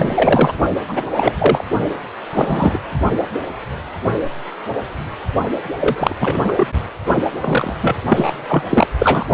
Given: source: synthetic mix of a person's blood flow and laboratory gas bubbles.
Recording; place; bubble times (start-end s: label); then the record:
Doppler ultrasound of blood flow; precordium
0.00-0.53 s: bubbles
0.88-1.02 s: bubbles
1.16-1.35 s: bubbles
1.38-1.65 s: bubbles
2.33-2.79 s: bubbles
5.77-6.16 s: bubbles
6.20-6.68 s: bubbles
7.40-7.76 s: bubbles
7.82-7.96 s: bubbles
8.10-8.33 s: bubbles
8.49-8.62 s: bubbles
8.70-8.87 s: bubbles
8.99-9.25 s: bubbles
From the record:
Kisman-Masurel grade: 233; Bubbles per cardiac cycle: several, 3 to 8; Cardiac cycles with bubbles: 50 to 99%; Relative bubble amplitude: loud (0.450 to 0.775); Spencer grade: 3 (all of the cardiac periods contain showers or single bubble signals, but not dominating or overriding the cardiac motion signals); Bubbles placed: only in the low amplitude regions of the cardiac cycle